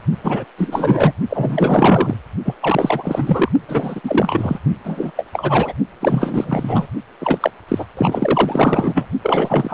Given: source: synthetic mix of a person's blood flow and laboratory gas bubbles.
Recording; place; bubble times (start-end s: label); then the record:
Doppler ultrasound of blood flow; precordium
0.23-0.44 s: bubbles
0.57-1.14 s: bubbles
1.29-2.15 s: bubbles
2.44-2.54 s: bubbles
2.61-3.52 s: bubbles
3.68-4.01 s: bubbles
4.04-4.58 s: bubbles
4.84-5.11 s: bubbles
5.17-5.25 s: bubbles
5.33-5.72 s: bubbles
6.00-6.88 s: bubbles
7.19-7.51 s: bubbles
7.68-7.85 s: bubbles
7.97-9.09 s: bubbles
9.23-9.74 s: bubbles
From the record:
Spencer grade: 4 (maximum detectable bubble signal sounding continuously throughout systole and diastole of every cardiac period, and overriding the amplitude of the normal cardiac signals); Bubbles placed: only in the low amplitude regions of the cardiac cycle